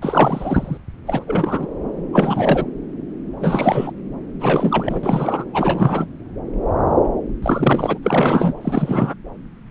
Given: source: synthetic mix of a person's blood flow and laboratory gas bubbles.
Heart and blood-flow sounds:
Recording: Doppler ultrasound of blood flow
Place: subclavian vein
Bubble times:
0.01-0.78 s: bubbles
1.06-1.67 s: bubbles
2.12-2.66 s: bubbles
3.40-3.92 s: bubbles
4.40-5.45 s: bubbles
5.54-6.06 s: bubbles
7.42-7.98 s: bubbles
8.02-8.53 s: bubbles
8.61-9.14 s: bubbles
From the record:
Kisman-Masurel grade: 332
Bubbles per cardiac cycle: rolling drumbeat, 9 or more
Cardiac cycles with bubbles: 50 to 99%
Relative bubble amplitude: moderate (0.250 to 0.450)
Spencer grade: 3 (all of the cardiac periods contain showers or single bubble signals, but not dominating or overriding the cardiac motion signals)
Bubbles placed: anywhere in the cardiac cycle

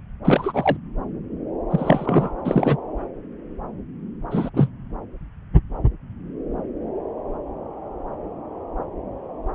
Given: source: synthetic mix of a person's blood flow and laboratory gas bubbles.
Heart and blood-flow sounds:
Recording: Doppler ultrasound of blood flow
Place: subclavian vein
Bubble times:
0.25-0.76 s: bubbles
1.71-2.33 s: bubbles
2.44-2.77 s: bubbles
4.31-4.50 s: bubbles
4.54-4.70 s: bubbles
From the record:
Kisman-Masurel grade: 223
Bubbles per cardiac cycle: several, 3 to 8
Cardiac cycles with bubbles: 10 to 50%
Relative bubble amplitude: loud (0.450 to 0.775)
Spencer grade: 2 (many but less than half of the cardiac periods contain bubble signals, singularly or in groups)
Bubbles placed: anywhere in the cardiac cycle

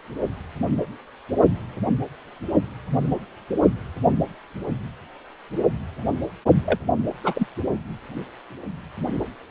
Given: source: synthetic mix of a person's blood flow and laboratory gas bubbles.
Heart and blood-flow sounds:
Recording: Doppler ultrasound of blood flow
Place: precordium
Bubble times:
6.65-6.79 s: bubbles
7.23-7.47 s: bubbles
From the record:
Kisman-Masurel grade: 212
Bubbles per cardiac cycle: several, 3 to 8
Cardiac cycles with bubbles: 1 to 10%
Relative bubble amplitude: moderate (0.250 to 0.450)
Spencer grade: 1 (occasional bubble signal discernible with the cardiac motion signal, with majority of cardiac periods free of bubbles)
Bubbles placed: only in the low amplitude regions of the cardiac cycle

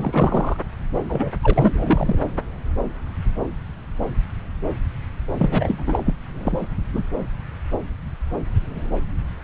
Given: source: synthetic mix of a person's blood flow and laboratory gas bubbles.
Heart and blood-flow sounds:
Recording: Doppler ultrasound of blood flow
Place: subclavian vein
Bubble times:
0.00-0.56 s: bubbles
1.09-1.31 s: bubbles
1.43-1.71 s: bubbles
1.74-2.19 s: bubbles
5.38-6.04 s: bubbles
6.06-6.14 s: bubbles
6.35-6.68 s: bubbles
6.92-7.04 s: bubbles
From the record:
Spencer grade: 2 (many but less than half of the cardiac periods contain bubble signals, singularly or in groups)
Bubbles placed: anywhere in the cardiac cycle

